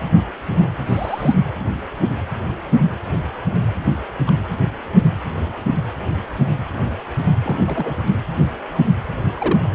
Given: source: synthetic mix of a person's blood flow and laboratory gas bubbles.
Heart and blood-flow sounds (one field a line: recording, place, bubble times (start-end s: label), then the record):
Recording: Doppler ultrasound of blood flow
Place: precordium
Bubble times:
0.88-1.34 s: bubbles
4.18-4.24 s: bubbles
4.27-4.31 s: bubbles
7.43-7.97 s: bubbles
9.36-9.67 s: bubbles
From the record:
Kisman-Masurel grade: 122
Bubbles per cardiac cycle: 1 to 2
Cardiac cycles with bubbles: 10 to 50%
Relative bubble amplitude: moderate (0.250 to 0.450)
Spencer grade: 2 (many but less than half of the cardiac periods contain bubble signals, singularly or in groups)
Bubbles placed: anywhere in the cardiac cycle